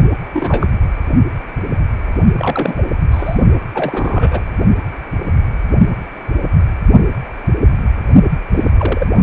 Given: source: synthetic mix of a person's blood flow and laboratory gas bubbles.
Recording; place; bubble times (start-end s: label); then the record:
Doppler ultrasound of blood flow; precordium
0.34-0.67 s: bubbles
2.36-2.83 s: bubbles
3.11-3.40 s: bubbles
3.75-4.46 s: bubbles
8.49-8.71 s: bubbles
8.78-9.07 s: bubbles
9.15-9.23 s: bubbles
From the record:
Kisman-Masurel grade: 222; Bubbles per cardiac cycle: several, 3 to 8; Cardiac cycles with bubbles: 10 to 50%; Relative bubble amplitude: moderate (0.250 to 0.450); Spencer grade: 2 (many but less than half of the cardiac periods contain bubble signals, singularly or in groups); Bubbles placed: only in the low amplitude regions of the cardiac cycle